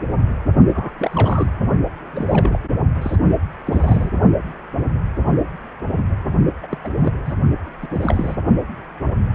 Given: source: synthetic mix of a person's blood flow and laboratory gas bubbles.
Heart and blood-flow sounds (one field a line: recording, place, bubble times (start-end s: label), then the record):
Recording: Doppler ultrasound of blood flow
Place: precordium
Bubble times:
0.74-0.91 s: bubbles
0.98-1.49 s: bubbles
2.12-2.59 s: bubbles
3.01-3.15 s: bubbles
3.66-4.11 s: bubbles
6.62-6.67 s: bubbles
6.71-6.78 s: bubbles
6.84-6.88 s: bubbles
7.03-7.12 s: bubbles
7.25-7.34 s: bubbles
7.82-7.88 s: bubbles
7.92-8.36 s: bubbles
From the record:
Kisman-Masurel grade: 232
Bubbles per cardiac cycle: several, 3 to 8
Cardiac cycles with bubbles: 50 to 99%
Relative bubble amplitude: moderate (0.250 to 0.450)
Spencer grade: 3 (all of the cardiac periods contain showers or single bubble signals, but not dominating or overriding the cardiac motion signals)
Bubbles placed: only in the low amplitude regions of the cardiac cycle